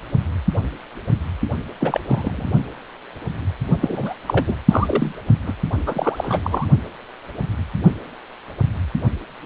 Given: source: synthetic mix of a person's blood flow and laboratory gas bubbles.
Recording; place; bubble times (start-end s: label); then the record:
Doppler ultrasound of blood flow; precordium
1.80-2.00 s: bubbles
2.06-2.46 s: bubbles
3.81-4.14 s: bubbles
4.27-4.55 s: bubbles
4.68-5.16 s: bubbles
5.46-5.53 s: bubbles
5.86-6.67 s: bubbles
From the record:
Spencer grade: 2 (many but less than half of the cardiac periods contain bubble signals, singularly or in groups); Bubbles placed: only in the low amplitude regions of the cardiac cycle